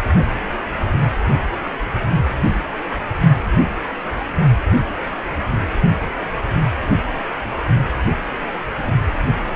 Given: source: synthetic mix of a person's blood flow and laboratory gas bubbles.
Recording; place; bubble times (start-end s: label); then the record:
Doppler ultrasound of blood flow; precordium
no bubbles
From the record:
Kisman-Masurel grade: 000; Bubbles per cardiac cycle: 0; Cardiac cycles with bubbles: 0%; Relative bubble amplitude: no bubbles discernible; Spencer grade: 0 (complete lack of bubble signals)